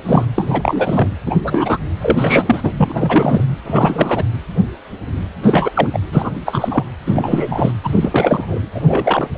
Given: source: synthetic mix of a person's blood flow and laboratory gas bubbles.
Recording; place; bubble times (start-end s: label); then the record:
Doppler ultrasound of blood flow; precordium
0.05-0.26 s: bubbles
0.36-1.08 s: bubbles
1.26-1.36 s: bubbles
1.44-1.78 s: bubbles
2.00-2.72 s: bubbles
2.77-3.46 s: bubbles
3.65-4.25 s: bubbles
5.42-5.71 s: bubbles
5.74-5.89 s: bubbles
5.92-5.99 s: bubbles
6.12-6.30 s: bubbles
6.46-6.84 s: bubbles
7.06-7.72 s: bubbles
7.83-8.60 s: bubbles
8.74-9.29 s: bubbles
9.35-9.38 s: bubbles
From the record:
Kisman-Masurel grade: 333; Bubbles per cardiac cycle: rolling drumbeat, 9 or more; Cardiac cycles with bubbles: 50 to 99%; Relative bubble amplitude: loud (0.450 to 0.775); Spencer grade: 3 (all of the cardiac periods contain showers or single bubble signals, but not dominating or overriding the cardiac motion signals); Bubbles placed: anywhere in the cardiac cycle